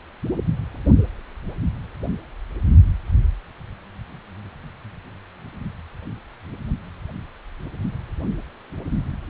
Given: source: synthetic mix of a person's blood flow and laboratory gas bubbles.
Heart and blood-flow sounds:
Doppler ultrasound of blood flow; precordium
no bubbles
From the record:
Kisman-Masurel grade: 000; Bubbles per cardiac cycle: 0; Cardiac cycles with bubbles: 0%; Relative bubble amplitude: no bubbles discernible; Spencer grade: 0 (complete lack of bubble signals)

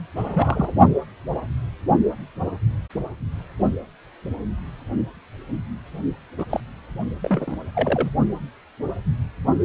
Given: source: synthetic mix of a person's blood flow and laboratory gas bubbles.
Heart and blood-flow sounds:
Doppler ultrasound of blood flow; precordium
0.15-0.74 s: bubbles
6.38-6.45 s: bubbles
6.50-6.60 s: bubbles
7.23-7.57 s: bubbles
7.75-8.11 s: bubbles
From the record:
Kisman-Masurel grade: 222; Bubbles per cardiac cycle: several, 3 to 8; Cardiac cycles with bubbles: 10 to 50%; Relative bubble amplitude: moderate (0.250 to 0.450); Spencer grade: 2 (many but less than half of the cardiac periods contain bubble signals, singularly or in groups); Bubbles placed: only in the low amplitude regions of the cardiac cycle

